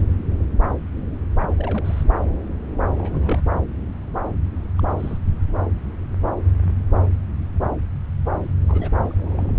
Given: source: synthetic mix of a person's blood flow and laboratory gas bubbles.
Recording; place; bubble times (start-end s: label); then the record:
Doppler ultrasound of blood flow; subclavian vein
1.40-1.50 s: bubbles
1.58-2.03 s: bubbles
2.98-3.44 s: bubbles
4.79-5.18 s: bubbles
8.69-8.91 s: bubbles
9.04-9.59 s: bubbles
From the record:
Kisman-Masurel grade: 221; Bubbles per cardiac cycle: several, 3 to 8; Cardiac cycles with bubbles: 10 to 50%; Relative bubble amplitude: barely perceptible (0.100 to 0.250); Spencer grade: 2 (many but less than half of the cardiac periods contain bubble signals, singularly or in groups); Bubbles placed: anywhere in the cardiac cycle